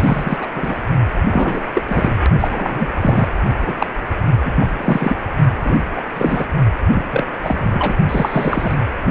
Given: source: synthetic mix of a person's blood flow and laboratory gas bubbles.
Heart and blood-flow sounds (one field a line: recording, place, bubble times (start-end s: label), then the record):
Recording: Doppler ultrasound of blood flow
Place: precordium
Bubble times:
0.00-0.39 s: bubbles
0.41-0.47 s: bubbles
0.54-0.81 s: bubbles
1.25-1.62 s: bubbles
1.73-1.82 s: bubbles
1.88-2.17 s: bubbles
2.40-2.48 s: bubbles
2.50-2.92 s: bubbles
3.01-3.28 s: bubbles
3.60-3.76 s: bubbles
3.78-3.86 s: bubbles
4.44-4.66 s: bubbles
4.78-5.16 s: bubbles
5.61-5.77 s: bubbles
5.96-6.02 s: bubbles
6.15-6.46 s: bubbles
6.94-7.05 s: bubbles
7.11-7.26 s: bubbles
7.42-7.93 s: bubbles
8.08-8.75 s: bubbles
From the record:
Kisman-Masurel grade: 343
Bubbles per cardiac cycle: rolling drumbeat, 9 or more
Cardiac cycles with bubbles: 100%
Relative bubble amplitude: loud (0.450 to 0.775)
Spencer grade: 3 (all of the cardiac periods contain showers or single bubble signals, but not dominating or overriding the cardiac motion signals)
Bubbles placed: only in the low amplitude regions of the cardiac cycle